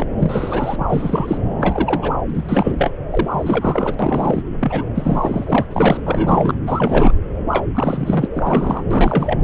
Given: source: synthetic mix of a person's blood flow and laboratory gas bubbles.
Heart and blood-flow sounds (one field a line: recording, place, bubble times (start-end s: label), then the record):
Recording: Doppler ultrasound of blood flow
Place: subclavian vein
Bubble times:
0.00-0.06 s: bubbles
0.20-0.85 s: bubbles
0.90-1.38 s: bubbles
1.58-2.12 s: bubbles
2.28-2.92 s: bubbles
3.10-3.94 s: bubbles
3.99-4.42 s: bubbles
4.59-4.83 s: bubbles
4.94-5.65 s: bubbles
5.70-6.01 s: bubbles
6.05-6.54 s: bubbles
6.66-7.12 s: bubbles
7.50-7.65 s: bubbles
7.74-8.28 s: bubbles
8.34-8.84 s: bubbles
8.90-9.38 s: bubbles
From the record:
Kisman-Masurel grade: 342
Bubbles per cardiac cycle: rolling drumbeat, 9 or more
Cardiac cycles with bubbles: 100%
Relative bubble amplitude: moderate (0.250 to 0.450)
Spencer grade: 3 (all of the cardiac periods contain showers or single bubble signals, but not dominating or overriding the cardiac motion signals)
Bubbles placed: anywhere in the cardiac cycle